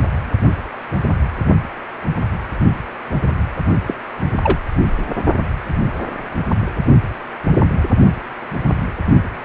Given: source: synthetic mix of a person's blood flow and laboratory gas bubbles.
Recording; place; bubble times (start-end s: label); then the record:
Doppler ultrasound of blood flow; precordium
3.87-3.94 s: bubbles
4.43-4.58 s: bubbles
4.98-5.04 s: bubbles
From the record:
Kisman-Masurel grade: 222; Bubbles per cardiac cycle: several, 3 to 8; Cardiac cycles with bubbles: 10 to 50%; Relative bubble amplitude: moderate (0.250 to 0.450); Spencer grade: 2 (many but less than half of the cardiac periods contain bubble signals, singularly or in groups); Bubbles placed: only in the low amplitude regions of the cardiac cycle